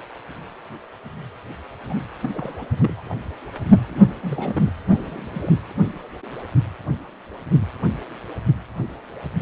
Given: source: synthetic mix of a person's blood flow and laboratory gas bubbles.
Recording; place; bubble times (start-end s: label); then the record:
Doppler ultrasound of blood flow; precordium
1.90-1.94 s: bubbles
2.22-2.29 s: bubbles
2.33-2.66 s: bubbles
2.79-3.02 s: bubbles
3.04-3.15 s: bubbles
3.88-4.72 s: bubbles
4.91-5.54 s: bubbles
From the record:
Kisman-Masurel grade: 221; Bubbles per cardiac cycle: several, 3 to 8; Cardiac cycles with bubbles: 10 to 50%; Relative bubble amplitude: barely perceptible (0.100 to 0.250); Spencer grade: 2 (many but less than half of the cardiac periods contain bubble signals, singularly or in groups); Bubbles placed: anywhere in the cardiac cycle